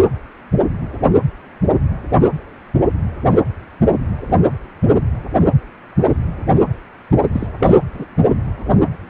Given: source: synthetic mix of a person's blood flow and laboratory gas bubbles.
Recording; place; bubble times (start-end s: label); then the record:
Doppler ultrasound of blood flow; precordium
7.32-7.47 s: bubbles
7.59-7.73 s: bubbles
7.93-8.05 s: bubbles
From the record:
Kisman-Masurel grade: 212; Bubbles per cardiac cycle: several, 3 to 8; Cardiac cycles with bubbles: 1 to 10%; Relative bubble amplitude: moderate (0.250 to 0.450); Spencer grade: 1 (occasional bubble signal discernible with the cardiac motion signal, with majority of cardiac periods free of bubbles); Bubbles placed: only in the low amplitude regions of the cardiac cycle